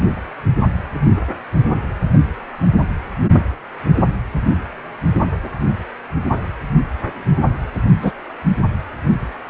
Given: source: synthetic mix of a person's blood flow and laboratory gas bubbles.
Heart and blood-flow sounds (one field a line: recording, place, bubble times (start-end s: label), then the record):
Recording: Doppler ultrasound of blood flow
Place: precordium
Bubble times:
8.02-8.12 s: bubbles
From the record:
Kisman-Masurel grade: 113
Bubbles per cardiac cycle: 1 to 2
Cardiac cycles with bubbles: 1 to 10%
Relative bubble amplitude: loud (0.450 to 0.775)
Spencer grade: 1 (occasional bubble signal discernible with the cardiac motion signal, with majority of cardiac periods free of bubbles)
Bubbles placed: only in the low amplitude regions of the cardiac cycle